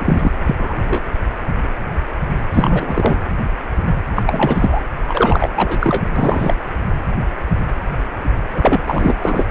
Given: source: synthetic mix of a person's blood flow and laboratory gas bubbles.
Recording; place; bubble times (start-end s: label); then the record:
Doppler ultrasound of blood flow; precordium
0.00-0.32 s: bubbles
0.45-1.03 s: bubbles
2.54-3.17 s: bubbles
4.15-4.22 s: bubbles
4.26-4.81 s: bubbles
5.08-5.49 s: bubbles
5.55-6.04 s: bubbles
6.16-6.55 s: bubbles
8.54-8.83 s: bubbles
8.87-9.18 s: bubbles
9.21-9.46 s: bubbles
From the record:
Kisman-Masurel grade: 333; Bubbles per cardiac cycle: rolling drumbeat, 9 or more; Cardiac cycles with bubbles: 50 to 99%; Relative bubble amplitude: loud (0.450 to 0.775); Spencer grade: 3 (all of the cardiac periods contain showers or single bubble signals, but not dominating or overriding the cardiac motion signals); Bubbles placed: anywhere in the cardiac cycle